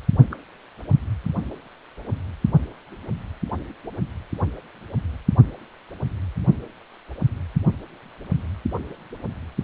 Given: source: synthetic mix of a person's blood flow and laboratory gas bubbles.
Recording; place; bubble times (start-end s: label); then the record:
Doppler ultrasound of blood flow; precordium
0.32-0.35 s: bubbles
From the record:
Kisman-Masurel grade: 111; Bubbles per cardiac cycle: 1 to 2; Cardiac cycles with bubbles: 1 to 10%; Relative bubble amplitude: barely perceptible (0.100 to 0.250); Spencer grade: 1 (occasional bubble signal discernible with the cardiac motion signal, with majority of cardiac periods free of bubbles); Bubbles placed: only in the low amplitude regions of the cardiac cycle